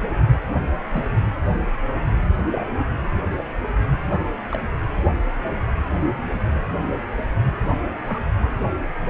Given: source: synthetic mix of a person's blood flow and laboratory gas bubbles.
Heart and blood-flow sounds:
Doppler ultrasound of blood flow; precordium
0.94-1.07 s: bubbles
2.50-2.65 s: bubbles
3.99-4.33 s: bubbles
4.52-4.60 s: bubbles
8.04-8.21 s: bubbles
From the record:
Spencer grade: 2 (many but less than half of the cardiac periods contain bubble signals, singularly or in groups); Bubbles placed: anywhere in the cardiac cycle

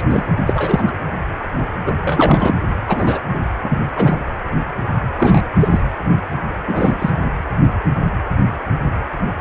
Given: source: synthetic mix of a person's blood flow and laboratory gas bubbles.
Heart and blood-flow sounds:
Doppler ultrasound of blood flow; precordium
0.00-0.04 s: bubbles
0.10-0.25 s: bubbles
0.47-0.96 s: bubbles
1.85-1.95 s: bubbles
2.05-2.54 s: bubbles
2.88-3.19 s: bubbles
3.33-3.39 s: bubbles
3.63-3.79 s: bubbles
3.96-4.16 s: bubbles
5.18-5.41 s: bubbles
5.59-5.81 s: bubbles
6.67-7.11 s: bubbles
From the record:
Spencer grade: 2 (many but less than half of the cardiac periods contain bubble signals, singularly or in groups); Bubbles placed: anywhere in the cardiac cycle

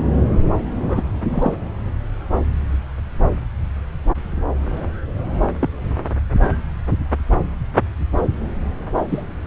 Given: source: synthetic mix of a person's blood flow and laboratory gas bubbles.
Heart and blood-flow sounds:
Doppler ultrasound of blood flow; subclavian vein
0.88-1.02 s: bubbles
1.29-1.57 s: bubbles
5.60-5.68 s: bubbles
9.09-9.23 s: bubbles
From the record:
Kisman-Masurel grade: 122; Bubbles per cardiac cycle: 1 to 2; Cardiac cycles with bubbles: 10 to 50%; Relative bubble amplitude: moderate (0.250 to 0.450); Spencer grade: 2 (many but less than half of the cardiac periods contain bubble signals, singularly or in groups); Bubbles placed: anywhere in the cardiac cycle

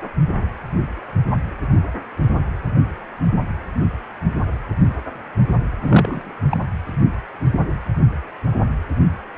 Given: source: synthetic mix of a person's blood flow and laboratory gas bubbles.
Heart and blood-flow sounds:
Doppler ultrasound of blood flow; precordium
5.82-6.34 s: bubbles
6.50-6.58 s: bubbles
From the record:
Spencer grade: 1 (occasional bubble signal discernible with the cardiac motion signal, with majority of cardiac periods free of bubbles); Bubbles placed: anywhere in the cardiac cycle

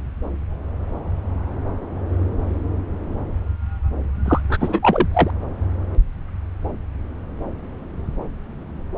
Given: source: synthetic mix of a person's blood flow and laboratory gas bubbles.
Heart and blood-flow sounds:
Doppler ultrasound of blood flow; subclavian vein
4.25-4.41 s: bubbles
4.49-4.79 s: bubbles
4.82-5.08 s: bubbles
5.13-5.30 s: bubbles
From the record:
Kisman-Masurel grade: 213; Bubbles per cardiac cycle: several, 3 to 8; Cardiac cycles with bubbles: 1 to 10%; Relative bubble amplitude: loud (0.450 to 0.775); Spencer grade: 1 (occasional bubble signal discernible with the cardiac motion signal, with majority of cardiac periods free of bubbles); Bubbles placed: anywhere in the cardiac cycle

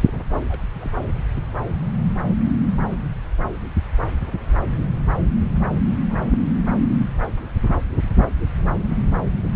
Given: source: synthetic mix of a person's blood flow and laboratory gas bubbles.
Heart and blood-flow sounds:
Doppler ultrasound of blood flow; subclavian vein
0.06-0.12 s: bubbles
0.48-0.63 s: bubbles
0.76-0.97 s: bubbles
1.08-1.12 s: bubbles
6.09-6.61 s: bubbles
From the record:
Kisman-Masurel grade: 221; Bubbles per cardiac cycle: several, 3 to 8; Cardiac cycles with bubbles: 10 to 50%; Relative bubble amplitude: barely perceptible (0.100 to 0.250); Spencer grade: 2 (many but less than half of the cardiac periods contain bubble signals, singularly or in groups); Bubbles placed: anywhere in the cardiac cycle

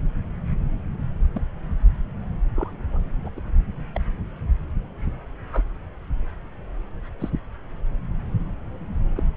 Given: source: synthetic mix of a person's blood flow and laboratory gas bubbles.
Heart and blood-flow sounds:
Doppler ultrasound of blood flow; subclavian vein
1.34-1.42 s: bubbles
2.55-3.02 s: bubbles
3.25-3.30 s: bubbles
3.37-3.41 s: bubbles
3.94-4.01 s: bubbles
5.52-5.62 s: bubbles
7.19-7.30 s: bubbles
9.16-9.23 s: bubbles
From the record:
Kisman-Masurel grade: 121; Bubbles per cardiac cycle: 1 to 2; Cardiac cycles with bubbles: 10 to 50%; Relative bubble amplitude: barely perceptible (0.100 to 0.250); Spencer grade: 2 (many but less than half of the cardiac periods contain bubble signals, singularly or in groups); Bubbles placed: anywhere in the cardiac cycle

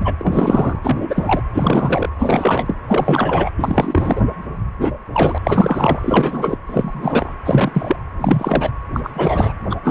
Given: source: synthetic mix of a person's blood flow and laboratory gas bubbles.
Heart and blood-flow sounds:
Doppler ultrasound of blood flow; precordium
0.01-0.15 s: bubbles
0.18-0.80 s: bubbles
0.83-1.42 s: bubbles
1.53-2.09 s: bubbles
2.19-2.76 s: bubbles
2.88-3.50 s: bubbles
3.57-4.21 s: bubbles
4.79-4.92 s: bubbles
5.12-5.38 s: bubbles
5.44-6.57 s: bubbles
6.67-7.29 s: bubbles
7.45-7.96 s: bubbles
8.21-8.71 s: bubbles
8.94-9.10 s: bubbles
9.13-9.53 s: bubbles
9.70-9.77 s: bubbles
9.83-9.91 s: bubbles
From the record:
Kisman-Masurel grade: 343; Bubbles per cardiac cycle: rolling drumbeat, 9 or more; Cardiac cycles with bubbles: 100%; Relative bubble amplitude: loud (0.450 to 0.775); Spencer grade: 3 (all of the cardiac periods contain showers or single bubble signals, but not dominating or overriding the cardiac motion signals); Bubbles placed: anywhere in the cardiac cycle

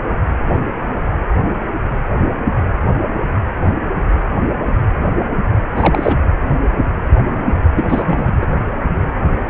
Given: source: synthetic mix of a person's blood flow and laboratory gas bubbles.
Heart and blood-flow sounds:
Doppler ultrasound of blood flow; precordium
5.75-6.18 s: bubbles
7.75-7.85 s: bubbles
7.88-8.33 s: bubbles
8.41-8.46 s: bubbles
From the record:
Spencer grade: 1 (occasional bubble signal discernible with the cardiac motion signal, with majority of cardiac periods free of bubbles); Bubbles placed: anywhere in the cardiac cycle

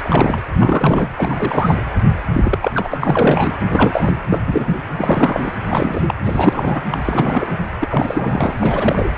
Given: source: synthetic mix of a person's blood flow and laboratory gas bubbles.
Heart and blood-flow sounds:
Doppler ultrasound of blood flow; precordium
0.00-0.40 s: bubbles
0.59-1.07 s: bubbles
1.16-1.84 s: bubbles
2.33-2.72 s: bubbles
2.75-2.98 s: bubbles
3.01-3.57 s: bubbles
3.73-4.15 s: bubbles
4.31-4.41 s: bubbles
4.46-4.78 s: bubbles
4.98-5.52 s: bubbles
5.69-6.01 s: bubbles
6.08-6.14 s: bubbles
6.25-6.82 s: bubbles
6.90-7.00 s: bubbles
7.05-7.58 s: bubbles
7.81-8.54 s: bubbles
8.58-9.10 s: bubbles
From the record:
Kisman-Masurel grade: 343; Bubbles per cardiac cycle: rolling drumbeat, 9 or more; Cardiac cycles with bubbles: 100%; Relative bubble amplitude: loud (0.450 to 0.775); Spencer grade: 3 (all of the cardiac periods contain showers or single bubble signals, but not dominating or overriding the cardiac motion signals); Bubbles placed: anywhere in the cardiac cycle

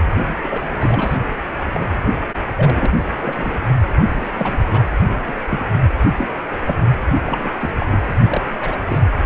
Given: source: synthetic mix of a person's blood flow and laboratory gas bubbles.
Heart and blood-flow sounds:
Doppler ultrasound of blood flow; precordium
0.11-0.16 s: bubbles
0.43-1.17 s: bubbles
1.74-1.88 s: bubbles
2.56-2.94 s: bubbles
3.19-3.58 s: bubbles
4.01-4.29 s: bubbles
4.37-4.88 s: bubbles
5.08-5.19 s: bubbles
5.27-5.34 s: bubbles
5.51-5.60 s: bubbles
6.18-6.40 s: bubbles
6.66-6.76 s: bubbles
7.26-7.54 s: bubbles
7.60-7.70 s: bubbles
7.79-7.86 s: bubbles
7.91-8.00 s: bubbles
8.26-8.41 s: bubbles
8.60-8.79 s: bubbles
8.88-8.99 s: bubbles
9.14-9.26 s: bubbles
From the record:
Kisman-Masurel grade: 242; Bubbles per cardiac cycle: several, 3 to 8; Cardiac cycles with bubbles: 100%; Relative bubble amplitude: moderate (0.250 to 0.450); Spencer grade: 3 (all of the cardiac periods contain showers or single bubble signals, but not dominating or overriding the cardiac motion signals); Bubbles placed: anywhere in the cardiac cycle

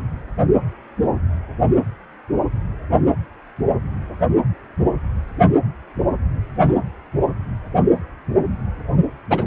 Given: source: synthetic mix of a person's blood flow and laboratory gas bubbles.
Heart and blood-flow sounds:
Doppler ultrasound of blood flow; precordium
9.30-9.45 s: bubbles
From the record:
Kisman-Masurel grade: 113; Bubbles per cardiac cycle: 1 to 2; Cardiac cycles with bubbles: 1 to 10%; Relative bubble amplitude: loud (0.450 to 0.775); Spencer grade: 1 (occasional bubble signal discernible with the cardiac motion signal, with majority of cardiac periods free of bubbles); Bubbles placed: anywhere in the cardiac cycle

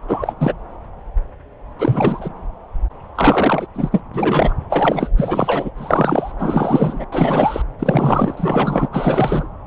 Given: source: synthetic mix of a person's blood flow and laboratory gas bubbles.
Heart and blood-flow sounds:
Doppler ultrasound of blood flow; subclavian vein
0.07-0.34 s: bubbles
0.39-0.53 s: bubbles
1.79-2.29 s: bubbles
3.15-3.67 s: bubbles
3.74-4.03 s: bubbles
4.13-4.54 s: bubbles
4.70-5.10 s: bubbles
5.17-5.71 s: bubbles
5.77-6.32 s: bubbles
6.39-7.04 s: bubbles
7.12-7.62 s: bubbles
7.79-8.88 s: bubbles
8.92-9.47 s: bubbles
From the record:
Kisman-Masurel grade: 333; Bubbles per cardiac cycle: rolling drumbeat, 9 or more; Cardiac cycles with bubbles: 50 to 99%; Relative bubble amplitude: loud (0.450 to 0.775); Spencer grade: 3 (all of the cardiac periods contain showers or single bubble signals, but not dominating or overriding the cardiac motion signals); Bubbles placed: anywhere in the cardiac cycle

